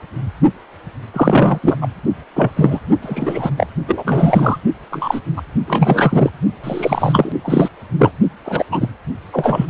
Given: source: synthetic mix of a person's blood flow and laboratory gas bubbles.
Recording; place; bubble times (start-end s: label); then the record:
Doppler ultrasound of blood flow; precordium
1.14-1.59 s: bubbles
1.62-1.76 s: bubbles
1.81-1.88 s: bubbles
2.36-2.51 s: bubbles
2.56-2.80 s: bubbles
3.02-3.50 s: bubbles
3.58-3.67 s: bubbles
3.87-4.57 s: bubbles
4.91-5.21 s: bubbles
5.36-5.42 s: bubbles
5.67-6.30 s: bubbles
6.63-7.32 s: bubbles
7.43-7.69 s: bubbles
7.98-8.12 s: bubbles
8.46-8.64 s: bubbles
8.71-8.88 s: bubbles
9.32-9.70 s: bubbles
From the record:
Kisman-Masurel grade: 233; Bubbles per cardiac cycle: several, 3 to 8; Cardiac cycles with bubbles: 50 to 99%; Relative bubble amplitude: loud (0.450 to 0.775); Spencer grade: 3 (all of the cardiac periods contain showers or single bubble signals, but not dominating or overriding the cardiac motion signals); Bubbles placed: only in the low amplitude regions of the cardiac cycle